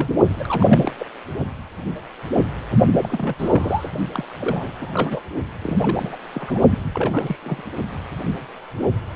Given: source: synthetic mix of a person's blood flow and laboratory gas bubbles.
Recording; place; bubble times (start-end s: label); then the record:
Doppler ultrasound of blood flow; precordium
0.00-0.09 s: bubbles
0.39-0.93 s: bubbles
0.99-1.06 s: bubbles
3.01-3.34 s: bubbles
3.38-3.90 s: bubbles
4.12-4.24 s: bubbles
4.39-4.73 s: bubbles
4.80-5.23 s: bubbles
5.62-6.17 s: bubbles
6.33-6.60 s: bubbles
6.70-6.79 s: bubbles
6.94-7.37 s: bubbles
7.43-7.63 s: bubbles
From the record:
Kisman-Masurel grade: 332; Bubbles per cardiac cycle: rolling drumbeat, 9 or more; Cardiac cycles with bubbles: 50 to 99%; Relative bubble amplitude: moderate (0.250 to 0.450); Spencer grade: 3 (all of the cardiac periods contain showers or single bubble signals, but not dominating or overriding the cardiac motion signals); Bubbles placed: only in the low amplitude regions of the cardiac cycle